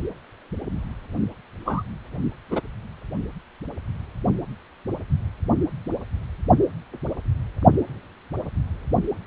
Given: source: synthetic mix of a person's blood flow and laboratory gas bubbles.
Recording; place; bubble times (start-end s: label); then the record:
Doppler ultrasound of blood flow; precordium
1.65-1.82 s: bubbles
2.50-2.60 s: bubbles
From the record:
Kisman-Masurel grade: 122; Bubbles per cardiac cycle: 1 to 2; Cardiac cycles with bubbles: 10 to 50%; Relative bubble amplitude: moderate (0.250 to 0.450); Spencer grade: 2 (many but less than half of the cardiac periods contain bubble signals, singularly or in groups); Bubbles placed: only in the low amplitude regions of the cardiac cycle